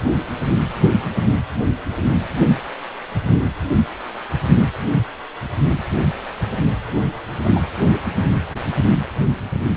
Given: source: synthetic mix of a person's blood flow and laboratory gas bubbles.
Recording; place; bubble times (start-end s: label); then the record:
Doppler ultrasound of blood flow; precordium
7.44-7.62 s: bubbles
From the record:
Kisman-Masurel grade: 122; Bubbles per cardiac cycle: 1 to 2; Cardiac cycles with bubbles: 10 to 50%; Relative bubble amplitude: moderate (0.250 to 0.450); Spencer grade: 2 (many but less than half of the cardiac periods contain bubble signals, singularly or in groups); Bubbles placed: anywhere in the cardiac cycle